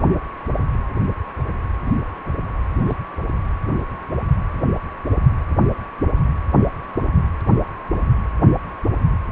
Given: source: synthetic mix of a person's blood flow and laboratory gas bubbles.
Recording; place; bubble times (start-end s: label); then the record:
Doppler ultrasound of blood flow; precordium
2.79-2.96 s: bubbles
From the record:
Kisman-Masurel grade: 111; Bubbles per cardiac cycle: 1 to 2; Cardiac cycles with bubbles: 1 to 10%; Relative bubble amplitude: barely perceptible (0.100 to 0.250); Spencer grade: 1 (occasional bubble signal discernible with the cardiac motion signal, with majority of cardiac periods free of bubbles); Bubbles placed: anywhere in the cardiac cycle